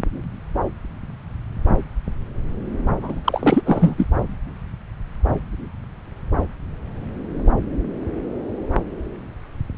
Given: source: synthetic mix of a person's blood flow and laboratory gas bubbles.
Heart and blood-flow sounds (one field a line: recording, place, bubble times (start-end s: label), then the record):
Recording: Doppler ultrasound of blood flow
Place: subclavian vein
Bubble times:
3.01-3.62 s: bubbles
3.66-3.94 s: bubbles
3.97-4.06 s: bubbles
From the record:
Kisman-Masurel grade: 213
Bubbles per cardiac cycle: several, 3 to 8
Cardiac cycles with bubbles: 1 to 10%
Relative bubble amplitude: loud (0.450 to 0.775)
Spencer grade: 1 (occasional bubble signal discernible with the cardiac motion signal, with majority of cardiac periods free of bubbles)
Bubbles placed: anywhere in the cardiac cycle